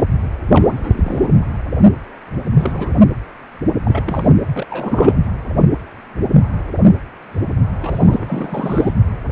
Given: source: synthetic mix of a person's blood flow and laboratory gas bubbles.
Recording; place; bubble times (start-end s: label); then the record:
Doppler ultrasound of blood flow; precordium
0.00-0.04 s: bubbles
0.52-1.36 s: bubbles
2.58-3.04 s: bubbles
3.83-4.03 s: bubbles
4.05-4.29 s: bubbles
4.54-4.67 s: bubbles
4.70-5.17 s: bubbles
7.80-8.94 s: bubbles
From the record:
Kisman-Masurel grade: 332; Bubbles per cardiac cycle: rolling drumbeat, 9 or more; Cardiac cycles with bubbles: 50 to 99%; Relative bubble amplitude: moderate (0.250 to 0.450); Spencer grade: 3 (all of the cardiac periods contain showers or single bubble signals, but not dominating or overriding the cardiac motion signals); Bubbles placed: anywhere in the cardiac cycle